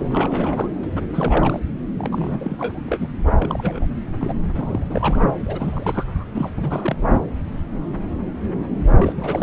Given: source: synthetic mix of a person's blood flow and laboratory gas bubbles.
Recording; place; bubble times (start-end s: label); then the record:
Doppler ultrasound of blood flow; subclavian vein
0.00-0.68 s: bubbles
0.83-0.86 s: bubbles
0.94-1.04 s: bubbles
1.13-1.60 s: bubbles
1.98-2.56 s: bubbles
2.58-2.81 s: bubbles
2.86-3.07 s: bubbles
3.40-3.87 s: bubbles
4.20-4.34 s: bubbles
4.54-4.87 s: bubbles
4.90-5.27 s: bubbles
5.45-6.25 s: bubbles
6.33-6.50 s: bubbles
6.57-6.96 s: bubbles
7.12-7.25 s: bubbles
8.87-9.12 s: bubbles
9.16-9.43 s: bubbles
From the record:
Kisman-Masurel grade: 332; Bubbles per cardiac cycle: rolling drumbeat, 9 or more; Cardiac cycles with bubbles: 50 to 99%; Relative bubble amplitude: moderate (0.250 to 0.450); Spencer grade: 3 (all of the cardiac periods contain showers or single bubble signals, but not dominating or overriding the cardiac motion signals); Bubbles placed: anywhere in the cardiac cycle